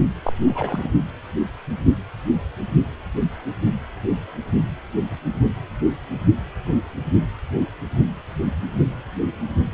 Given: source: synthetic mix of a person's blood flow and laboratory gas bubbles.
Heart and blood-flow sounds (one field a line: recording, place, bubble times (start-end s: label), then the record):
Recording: Doppler ultrasound of blood flow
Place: precordium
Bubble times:
0.26-0.33 s: bubbles
0.46-0.91 s: bubbles
From the record:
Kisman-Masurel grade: 211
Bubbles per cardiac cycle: several, 3 to 8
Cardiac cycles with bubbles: 1 to 10%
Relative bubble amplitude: barely perceptible (0.100 to 0.250)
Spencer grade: 1 (occasional bubble signal discernible with the cardiac motion signal, with majority of cardiac periods free of bubbles)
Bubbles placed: only in the low amplitude regions of the cardiac cycle